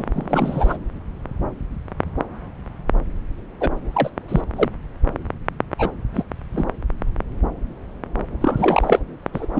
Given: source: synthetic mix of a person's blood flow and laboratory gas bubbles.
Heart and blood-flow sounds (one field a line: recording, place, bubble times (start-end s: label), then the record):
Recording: Doppler ultrasound of blood flow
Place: subclavian vein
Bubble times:
0.00-0.04 s: bubbles
0.14-0.77 s: bubbles
3.60-3.69 s: bubbles
3.92-4.10 s: bubbles
4.28-4.42 s: bubbles
4.56-4.68 s: bubbles
5.78-5.92 s: bubbles
6.14-6.24 s: bubbles
6.53-6.65 s: bubbles
8.40-9.00 s: bubbles
9.33-9.46 s: bubbles
9.55-9.60 s: bubbles
From the record:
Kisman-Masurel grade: 232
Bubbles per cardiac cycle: several, 3 to 8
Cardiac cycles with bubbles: 50 to 99%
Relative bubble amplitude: moderate (0.250 to 0.450)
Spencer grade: 3 (all of the cardiac periods contain showers or single bubble signals, but not dominating or overriding the cardiac motion signals)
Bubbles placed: anywhere in the cardiac cycle